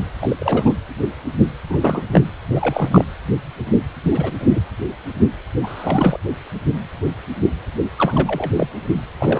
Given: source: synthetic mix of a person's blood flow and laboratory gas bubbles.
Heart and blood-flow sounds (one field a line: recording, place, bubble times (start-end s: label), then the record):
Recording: Doppler ultrasound of blood flow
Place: precordium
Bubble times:
0.00-0.09 s: bubbles
0.21-0.72 s: bubbles
1.69-1.77 s: bubbles
1.80-2.03 s: bubbles
2.11-2.21 s: bubbles
2.55-3.04 s: bubbles
4.03-4.32 s: bubbles
4.40-4.61 s: bubbles
5.63-6.18 s: bubbles
7.97-8.50 s: bubbles
8.53-8.67 s: bubbles
9.20-9.40 s: bubbles
From the record:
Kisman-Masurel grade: 232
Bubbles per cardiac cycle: several, 3 to 8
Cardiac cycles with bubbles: 50 to 99%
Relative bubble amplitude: moderate (0.250 to 0.450)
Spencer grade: 3 (all of the cardiac periods contain showers or single bubble signals, but not dominating or overriding the cardiac motion signals)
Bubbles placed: anywhere in the cardiac cycle